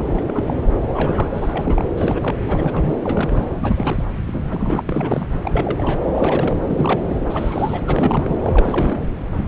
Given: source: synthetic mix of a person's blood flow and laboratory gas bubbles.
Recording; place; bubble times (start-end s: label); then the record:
Doppler ultrasound of blood flow; subclavian vein
0.00-0.43 s: bubbles
0.46-0.54 s: bubbles
0.94-1.28 s: bubbles
1.31-1.89 s: bubbles
1.97-2.35 s: bubbles
2.48-2.96 s: bubbles
3.04-3.46 s: bubbles
3.61-4.03 s: bubbles
4.26-4.82 s: bubbles
4.86-5.26 s: bubbles
5.43-6.08 s: bubbles
6.15-6.57 s: bubbles
6.68-7.20 s: bubbles
7.30-7.82 s: bubbles
7.86-8.37 s: bubbles
8.42-9.00 s: bubbles
From the record:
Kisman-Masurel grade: 332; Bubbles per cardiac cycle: rolling drumbeat, 9 or more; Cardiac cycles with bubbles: 50 to 99%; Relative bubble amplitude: moderate (0.250 to 0.450); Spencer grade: 3 (all of the cardiac periods contain showers or single bubble signals, but not dominating or overriding the cardiac motion signals); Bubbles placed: anywhere in the cardiac cycle